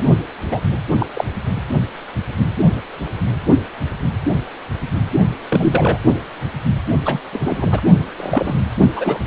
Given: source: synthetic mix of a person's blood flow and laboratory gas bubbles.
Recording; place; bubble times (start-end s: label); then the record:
Doppler ultrasound of blood flow; precordium
0.00-0.04 s: bubbles
0.51-0.59 s: bubbles
0.99-1.06 s: bubbles
1.14-1.25 s: bubbles
5.50-5.99 s: bubbles
7.05-7.20 s: bubbles
7.32-7.81 s: bubbles
8.17-8.62 s: bubbles
8.96-9.20 s: bubbles
From the record:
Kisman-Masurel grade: 232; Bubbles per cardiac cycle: several, 3 to 8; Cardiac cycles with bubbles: 50 to 99%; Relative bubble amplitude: moderate (0.250 to 0.450); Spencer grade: 3 (all of the cardiac periods contain showers or single bubble signals, but not dominating or overriding the cardiac motion signals); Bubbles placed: only in the low amplitude regions of the cardiac cycle